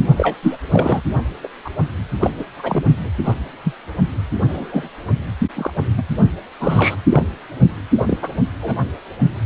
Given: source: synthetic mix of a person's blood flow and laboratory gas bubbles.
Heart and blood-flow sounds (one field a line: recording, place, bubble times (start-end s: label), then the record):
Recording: Doppler ultrasound of blood flow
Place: precordium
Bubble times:
0.16-0.37 s: bubbles
0.42-0.57 s: bubbles
0.71-1.03 s: bubbles
1.43-1.47 s: bubbles
1.65-1.70 s: bubbles
2.19-2.30 s: bubbles
2.40-2.44 s: bubbles
2.56-2.84 s: bubbles
2.96-3.10 s: bubbles
3.24-3.34 s: bubbles
3.64-3.73 s: bubbles
4.47-4.88 s: bubbles
5.55-5.71 s: bubbles
5.97-6.03 s: bubbles
6.59-6.96 s: bubbles
7.09-7.26 s: bubbles
7.98-8.29 s: bubbles
8.62-8.75 s: bubbles
From the record:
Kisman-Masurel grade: 242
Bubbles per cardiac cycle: several, 3 to 8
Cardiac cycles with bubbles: 100%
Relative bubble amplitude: moderate (0.250 to 0.450)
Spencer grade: 3 (all of the cardiac periods contain showers or single bubble signals, but not dominating or overriding the cardiac motion signals)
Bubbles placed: only in the low amplitude regions of the cardiac cycle